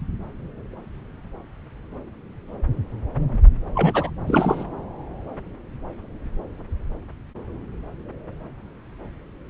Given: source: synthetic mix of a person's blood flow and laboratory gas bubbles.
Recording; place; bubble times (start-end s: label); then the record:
Doppler ultrasound of blood flow; subclavian vein
3.75-4.10 s: bubbles
4.27-4.64 s: bubbles
From the record:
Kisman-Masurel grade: 212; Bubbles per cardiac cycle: several, 3 to 8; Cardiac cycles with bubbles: 1 to 10%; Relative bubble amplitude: moderate (0.250 to 0.450); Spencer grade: 1 (occasional bubble signal discernible with the cardiac motion signal, with majority of cardiac periods free of bubbles); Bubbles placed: anywhere in the cardiac cycle